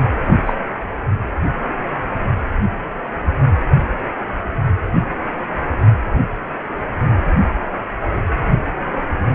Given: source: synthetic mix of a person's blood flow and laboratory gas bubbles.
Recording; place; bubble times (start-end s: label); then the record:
Doppler ultrasound of blood flow; precordium
0.20-0.39 s: bubbles
0.45-0.54 s: bubbles
From the record:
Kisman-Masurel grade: 113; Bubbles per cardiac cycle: 1 to 2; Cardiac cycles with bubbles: 1 to 10%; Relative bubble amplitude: loud (0.450 to 0.775); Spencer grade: 1 (occasional bubble signal discernible with the cardiac motion signal, with majority of cardiac periods free of bubbles); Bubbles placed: anywhere in the cardiac cycle